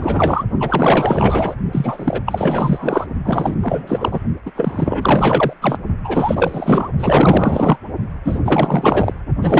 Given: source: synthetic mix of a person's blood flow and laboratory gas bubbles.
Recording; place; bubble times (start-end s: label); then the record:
Doppler ultrasound of blood flow; precordium
0.00-0.43 s: bubbles
0.59-1.55 s: bubbles
1.72-2.21 s: bubbles
2.26-3.07 s: bubbles
3.25-3.56 s: bubbles
3.62-4.21 s: bubbles
4.45-4.52 s: bubbles
4.56-5.53 s: bubbles
5.62-5.78 s: bubbles
6.04-6.91 s: bubbles
6.99-7.77 s: bubbles
8.24-8.40 s: bubbles
8.45-9.13 s: bubbles
9.42-9.60 s: bubbles
From the record:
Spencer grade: 4 (maximum detectable bubble signal sounding continuously throughout systole and diastole of every cardiac period, and overriding the amplitude of the normal cardiac signals); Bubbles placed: only in the low amplitude regions of the cardiac cycle